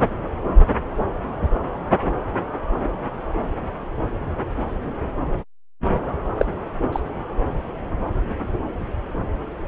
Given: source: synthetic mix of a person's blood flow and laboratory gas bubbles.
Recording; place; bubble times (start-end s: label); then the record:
Doppler ultrasound of blood flow; subclavian vein
6.38-6.46 s: bubbles
6.92-7.00 s: bubbles
From the record:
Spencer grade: 1 (occasional bubble signal discernible with the cardiac motion signal, with majority of cardiac periods free of bubbles); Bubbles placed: anywhere in the cardiac cycle